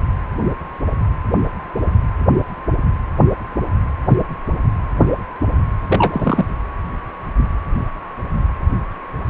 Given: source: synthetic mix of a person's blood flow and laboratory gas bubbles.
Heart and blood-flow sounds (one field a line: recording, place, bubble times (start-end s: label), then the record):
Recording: Doppler ultrasound of blood flow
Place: precordium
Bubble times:
5.87-6.45 s: bubbles
From the record:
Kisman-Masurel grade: 212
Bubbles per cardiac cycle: several, 3 to 8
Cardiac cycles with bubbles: 1 to 10%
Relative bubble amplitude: moderate (0.250 to 0.450)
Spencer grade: 1 (occasional bubble signal discernible with the cardiac motion signal, with majority of cardiac periods free of bubbles)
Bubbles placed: anywhere in the cardiac cycle